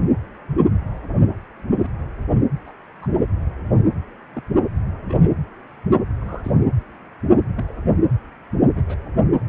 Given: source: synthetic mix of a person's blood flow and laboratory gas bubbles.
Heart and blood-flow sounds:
Doppler ultrasound of blood flow; precordium
1.83-1.88 s: bubbles
2.66-2.71 s: bubbles
3.01-3.06 s: bubbles
4.34-4.42 s: bubbles
5.04-5.29 s: bubbles
6.21-6.52 s: bubbles
7.56-7.63 s: bubbles
7.69-7.73 s: bubbles
8.75-8.83 s: bubbles
8.88-8.95 s: bubbles
From the record:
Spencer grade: 2 (many but less than half of the cardiac periods contain bubble signals, singularly or in groups); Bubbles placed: anywhere in the cardiac cycle

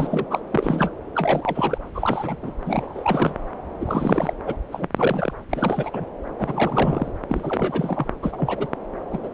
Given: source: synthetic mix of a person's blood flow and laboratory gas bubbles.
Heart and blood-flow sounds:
Doppler ultrasound of blood flow; subclavian vein
0.00-0.24 s: bubbles
0.30-0.40 s: bubbles
0.51-0.90 s: bubbles
1.15-1.78 s: bubbles
1.95-2.36 s: bubbles
2.43-2.52 s: bubbles
2.66-3.35 s: bubbles
3.81-4.33 s: bubbles
4.46-4.56 s: bubbles
4.72-4.88 s: bubbles
4.96-5.33 s: bubbles
5.50-6.05 s: bubbles
6.38-7.11 s: bubbles
7.29-8.07 s: bubbles
8.23-8.67 s: bubbles
9.11-9.19 s: bubbles
9.23-9.29 s: bubbles
From the record:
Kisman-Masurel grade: 342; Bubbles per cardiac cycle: rolling drumbeat, 9 or more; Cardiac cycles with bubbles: 100%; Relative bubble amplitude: moderate (0.250 to 0.450); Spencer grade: 3 (all of the cardiac periods contain showers or single bubble signals, but not dominating or overriding the cardiac motion signals); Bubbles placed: anywhere in the cardiac cycle

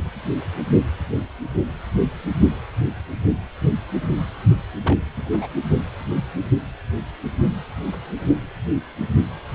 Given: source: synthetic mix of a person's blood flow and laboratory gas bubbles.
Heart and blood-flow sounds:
Doppler ultrasound of blood flow; precordium
4.85-4.98 s: bubbles
5.17-5.47 s: bubbles
From the record:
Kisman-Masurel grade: 211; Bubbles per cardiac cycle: several, 3 to 8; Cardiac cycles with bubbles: 1 to 10%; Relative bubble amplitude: barely perceptible (0.100 to 0.250); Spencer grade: 1 (occasional bubble signal discernible with the cardiac motion signal, with majority of cardiac periods free of bubbles); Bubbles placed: only in the low amplitude regions of the cardiac cycle

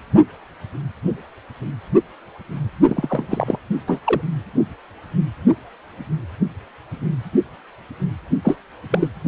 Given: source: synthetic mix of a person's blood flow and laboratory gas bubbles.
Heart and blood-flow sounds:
Doppler ultrasound of blood flow; precordium
2.88-3.27 s: bubbles
3.30-3.59 s: bubbles
3.87-4.01 s: bubbles
4.04-4.22 s: bubbles
8.44-8.56 s: bubbles
8.90-9.08 s: bubbles
From the record:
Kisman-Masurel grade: 223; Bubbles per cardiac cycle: several, 3 to 8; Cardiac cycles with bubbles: 10 to 50%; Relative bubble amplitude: loud (0.450 to 0.775); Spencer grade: 2 (many but less than half of the cardiac periods contain bubble signals, singularly or in groups); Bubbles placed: only in the low amplitude regions of the cardiac cycle

